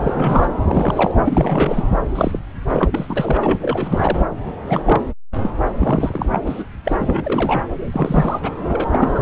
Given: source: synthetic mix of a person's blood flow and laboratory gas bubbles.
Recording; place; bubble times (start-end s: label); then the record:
Doppler ultrasound of blood flow; subclavian vein
0.00-0.47 s: bubbles
0.64-1.11 s: bubbles
1.25-1.84 s: bubbles
2.15-2.40 s: bubbles
2.70-2.89 s: bubbles
2.92-3.58 s: bubbles
3.61-4.21 s: bubbles
4.67-4.82 s: bubbles
4.85-5.01 s: bubbles
5.42-5.50 s: bubbles
5.64-5.67 s: bubbles
5.79-6.64 s: bubbles
6.85-7.64 s: bubbles
7.92-8.39 s: bubbles
8.42-8.50 s: bubbles
8.60-8.84 s: bubbles
8.91-9.22 s: bubbles
From the record:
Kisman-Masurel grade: 342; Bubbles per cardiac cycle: rolling drumbeat, 9 or more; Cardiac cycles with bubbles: 100%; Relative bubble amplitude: moderate (0.250 to 0.450); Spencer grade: 3 (all of the cardiac periods contain showers or single bubble signals, but not dominating or overriding the cardiac motion signals); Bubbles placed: anywhere in the cardiac cycle